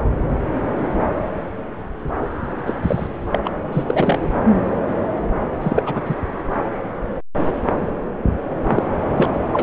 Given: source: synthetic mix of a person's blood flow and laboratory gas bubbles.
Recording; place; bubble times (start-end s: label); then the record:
Doppler ultrasound of blood flow; subclavian vein
2.67-2.74 s: bubbles
2.83-3.08 s: bubbles
3.32-3.41 s: bubbles
3.44-3.50 s: bubbles
3.73-3.84 s: bubbles
3.86-4.19 s: bubbles
5.61-6.14 s: bubbles
8.69-8.83 s: bubbles
9.11-9.27 s: bubbles
9.53-9.63 s: bubbles
From the record:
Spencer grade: 3 (all of the cardiac periods contain showers or single bubble signals, but not dominating or overriding the cardiac motion signals); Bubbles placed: anywhere in the cardiac cycle